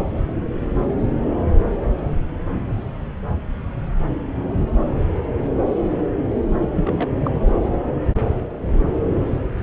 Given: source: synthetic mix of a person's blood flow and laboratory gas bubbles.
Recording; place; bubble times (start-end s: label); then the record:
Doppler ultrasound of blood flow; subclavian vein
6.76-7.10 s: bubbles
7.25-7.31 s: bubbles
From the record:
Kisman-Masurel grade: 212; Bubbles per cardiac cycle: several, 3 to 8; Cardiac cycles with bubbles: 1 to 10%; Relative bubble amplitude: moderate (0.250 to 0.450); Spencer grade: 1 (occasional bubble signal discernible with the cardiac motion signal, with majority of cardiac periods free of bubbles); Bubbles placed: anywhere in the cardiac cycle